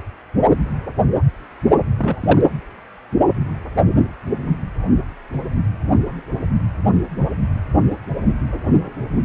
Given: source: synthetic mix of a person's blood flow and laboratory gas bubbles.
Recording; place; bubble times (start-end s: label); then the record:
Doppler ultrasound of blood flow; precordium
1.98-2.16 s: bubbles
2.21-2.41 s: bubbles
From the record:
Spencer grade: 1 (occasional bubble signal discernible with the cardiac motion signal, with majority of cardiac periods free of bubbles); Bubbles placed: anywhere in the cardiac cycle